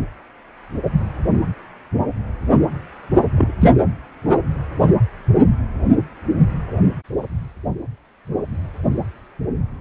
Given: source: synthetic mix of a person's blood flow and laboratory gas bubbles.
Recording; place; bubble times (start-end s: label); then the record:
Doppler ultrasound of blood flow; precordium
3.37-3.53 s: bubbles
3.60-3.72 s: bubbles
From the record:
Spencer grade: 1 (occasional bubble signal discernible with the cardiac motion signal, with majority of cardiac periods free of bubbles); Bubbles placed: anywhere in the cardiac cycle